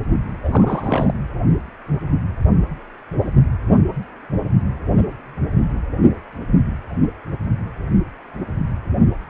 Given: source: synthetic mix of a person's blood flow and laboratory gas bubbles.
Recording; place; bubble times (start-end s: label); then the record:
Doppler ultrasound of blood flow; precordium
0.43-1.13 s: bubbles
From the record:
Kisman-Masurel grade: 212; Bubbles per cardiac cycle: several, 3 to 8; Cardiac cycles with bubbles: 1 to 10%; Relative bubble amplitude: moderate (0.250 to 0.450); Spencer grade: 1 (occasional bubble signal discernible with the cardiac motion signal, with majority of cardiac periods free of bubbles); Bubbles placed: anywhere in the cardiac cycle